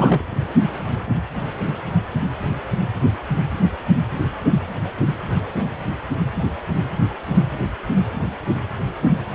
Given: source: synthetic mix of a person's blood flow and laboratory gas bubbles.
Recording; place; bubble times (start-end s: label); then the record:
Doppler ultrasound of blood flow; precordium
0.00-0.24 s: bubbles
From the record:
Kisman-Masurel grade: 212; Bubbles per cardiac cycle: several, 3 to 8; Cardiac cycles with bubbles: 1 to 10%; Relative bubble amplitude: moderate (0.250 to 0.450); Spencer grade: 1 (occasional bubble signal discernible with the cardiac motion signal, with majority of cardiac periods free of bubbles); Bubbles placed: anywhere in the cardiac cycle